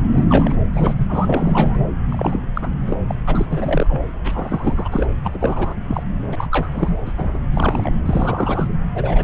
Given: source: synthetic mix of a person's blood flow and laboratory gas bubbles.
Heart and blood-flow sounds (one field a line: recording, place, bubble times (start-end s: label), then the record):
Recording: Doppler ultrasound of blood flow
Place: subclavian vein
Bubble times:
0.10-0.25 s: bubbles
0.29-0.56 s: bubbles
0.73-0.94 s: bubbles
0.97-1.79 s: bubbles
2.08-2.40 s: bubbles
2.54-2.76 s: bubbles
2.81-2.97 s: bubbles
3.08-3.15 s: bubbles
3.27-3.46 s: bubbles
3.49-4.01 s: bubbles
4.24-4.88 s: bubbles
4.91-5.07 s: bubbles
5.24-5.75 s: bubbles
5.88-6.03 s: bubbles
6.32-6.47 s: bubbles
6.51-6.69 s: bubbles
6.71-7.00 s: bubbles
7.05-7.12 s: bubbles
7.17-7.29 s: bubbles
7.33-7.38 s: bubbles
7.54-7.90 s: bubbles
8.06-8.75 s: bubbles
8.95-9.24 s: bubbles
From the record:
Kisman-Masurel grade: 342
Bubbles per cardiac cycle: rolling drumbeat, 9 or more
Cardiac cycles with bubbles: 100%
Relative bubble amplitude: moderate (0.250 to 0.450)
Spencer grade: 3 (all of the cardiac periods contain showers or single bubble signals, but not dominating or overriding the cardiac motion signals)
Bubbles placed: anywhere in the cardiac cycle